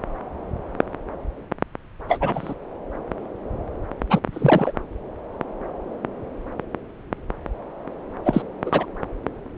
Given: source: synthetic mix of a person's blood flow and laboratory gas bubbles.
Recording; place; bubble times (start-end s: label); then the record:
Doppler ultrasound of blood flow; subclavian vein
2.08-2.54 s: bubbles
4.09-4.20 s: bubbles
4.33-4.71 s: bubbles
8.25-8.42 s: bubbles
8.65-8.86 s: bubbles
From the record:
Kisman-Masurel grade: 222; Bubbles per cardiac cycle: several, 3 to 8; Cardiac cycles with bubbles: 10 to 50%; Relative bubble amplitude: moderate (0.250 to 0.450); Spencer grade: 2 (many but less than half of the cardiac periods contain bubble signals, singularly or in groups); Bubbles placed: anywhere in the cardiac cycle